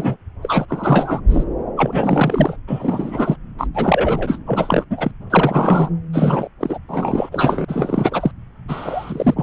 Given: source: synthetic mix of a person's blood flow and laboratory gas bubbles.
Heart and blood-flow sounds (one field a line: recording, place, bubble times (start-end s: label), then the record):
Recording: Doppler ultrasound of blood flow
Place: subclavian vein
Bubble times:
0.00-0.16 s: bubbles
0.42-0.66 s: bubbles
0.68-1.20 s: bubbles
1.29-1.44 s: bubbles
1.76-2.56 s: bubbles
2.67-3.36 s: bubbles
3.57-3.67 s: bubbles
3.74-4.38 s: bubbles
4.46-4.85 s: bubbles
4.90-5.11 s: bubbles
5.30-5.89 s: bubbles
6.13-6.49 s: bubbles
6.60-6.79 s: bubbles
6.88-7.29 s: bubbles
7.32-7.65 s: bubbles
7.68-8.31 s: bubbles
8.68-9.42 s: bubbles
From the record:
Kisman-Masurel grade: 343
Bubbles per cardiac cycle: rolling drumbeat, 9 or more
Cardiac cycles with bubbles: 100%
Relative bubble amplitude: loud (0.450 to 0.775)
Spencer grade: 3 (all of the cardiac periods contain showers or single bubble signals, but not dominating or overriding the cardiac motion signals)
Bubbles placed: anywhere in the cardiac cycle